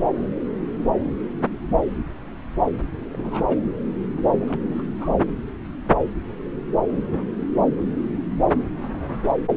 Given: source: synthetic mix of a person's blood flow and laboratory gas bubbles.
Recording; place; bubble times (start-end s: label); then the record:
Doppler ultrasound of blood flow; subclavian vein
3.12-3.57 s: bubbles
4.38-4.60 s: bubbles
4.68-4.83 s: bubbles
4.98-5.09 s: bubbles
From the record:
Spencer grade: 1 (occasional bubble signal discernible with the cardiac motion signal, with majority of cardiac periods free of bubbles); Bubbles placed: anywhere in the cardiac cycle